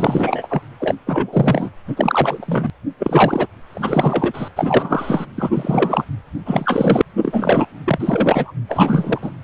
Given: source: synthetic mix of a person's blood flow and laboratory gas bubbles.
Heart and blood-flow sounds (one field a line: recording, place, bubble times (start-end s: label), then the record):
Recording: Doppler ultrasound of blood flow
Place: precordium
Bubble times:
0.00-0.61 s: bubbles
0.80-0.95 s: bubbles
1.06-1.69 s: bubbles
1.87-2.70 s: bubbles
2.99-3.47 s: bubbles
3.72-4.48 s: bubbles
4.56-5.25 s: bubbles
5.36-5.50 s: bubbles
5.54-6.04 s: bubbles
6.46-7.01 s: bubbles
7.17-7.65 s: bubbles
7.85-8.52 s: bubbles
8.69-9.19 s: bubbles
9.21-9.31 s: bubbles
From the record:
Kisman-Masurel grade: 343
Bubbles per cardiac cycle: rolling drumbeat, 9 or more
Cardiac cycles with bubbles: 100%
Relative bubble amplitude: loud (0.450 to 0.775)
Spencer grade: 3 (all of the cardiac periods contain showers or single bubble signals, but not dominating or overriding the cardiac motion signals)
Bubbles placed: anywhere in the cardiac cycle